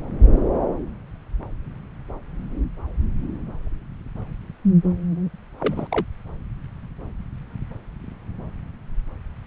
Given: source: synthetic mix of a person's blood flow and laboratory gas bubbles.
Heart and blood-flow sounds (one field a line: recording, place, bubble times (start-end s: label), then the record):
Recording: Doppler ultrasound of blood flow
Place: subclavian vein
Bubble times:
5.59-5.87 s: bubbles
5.91-6.05 s: bubbles
From the record:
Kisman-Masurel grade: 212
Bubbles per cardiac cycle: several, 3 to 8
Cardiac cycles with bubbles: 1 to 10%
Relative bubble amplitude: moderate (0.250 to 0.450)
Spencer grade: 1 (occasional bubble signal discernible with the cardiac motion signal, with majority of cardiac periods free of bubbles)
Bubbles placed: anywhere in the cardiac cycle